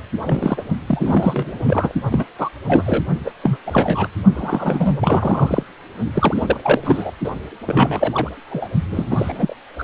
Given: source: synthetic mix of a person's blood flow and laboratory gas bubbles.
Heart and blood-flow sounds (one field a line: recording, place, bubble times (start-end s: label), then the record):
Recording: Doppler ultrasound of blood flow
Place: precordium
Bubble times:
0.24-0.61 s: bubbles
0.86-1.92 s: bubbles
2.11-2.24 s: bubbles
2.38-2.49 s: bubbles
2.67-3.04 s: bubbles
3.25-3.31 s: bubbles
3.42-3.57 s: bubbles
3.65-4.08 s: bubbles
4.35-5.63 s: bubbles
6.14-6.60 s: bubbles
6.63-7.11 s: bubbles
7.24-7.31 s: bubbles
7.66-8.29 s: bubbles
8.50-8.68 s: bubbles
8.90-9.54 s: bubbles
9.78-9.84 s: bubbles
From the record:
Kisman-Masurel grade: 343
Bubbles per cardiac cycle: rolling drumbeat, 9 or more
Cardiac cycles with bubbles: 100%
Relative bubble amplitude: loud (0.450 to 0.775)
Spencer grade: 3 (all of the cardiac periods contain showers or single bubble signals, but not dominating or overriding the cardiac motion signals)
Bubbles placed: only in the low amplitude regions of the cardiac cycle